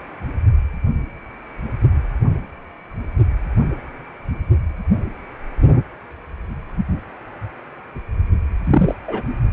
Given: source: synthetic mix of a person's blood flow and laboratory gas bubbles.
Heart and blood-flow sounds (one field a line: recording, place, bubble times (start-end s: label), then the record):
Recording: Doppler ultrasound of blood flow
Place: precordium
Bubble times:
8.64-8.95 s: bubbles
9.07-9.23 s: bubbles
From the record:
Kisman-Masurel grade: 123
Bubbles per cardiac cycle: 1 to 2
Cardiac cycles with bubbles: 10 to 50%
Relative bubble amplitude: loud (0.450 to 0.775)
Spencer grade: 2 (many but less than half of the cardiac periods contain bubble signals, singularly or in groups)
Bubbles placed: only in the low amplitude regions of the cardiac cycle